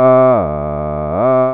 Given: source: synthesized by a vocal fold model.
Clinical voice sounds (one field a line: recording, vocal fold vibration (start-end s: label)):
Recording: sustained vowel that changes in the middle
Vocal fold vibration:
0.00-0.29 s: 129.4 Hz, open quotient 0.35
0.49-1.09 s: 74.6 Hz, open quotient 0.36
1.29-1.54 s: 129.4 Hz, open quotient 0.35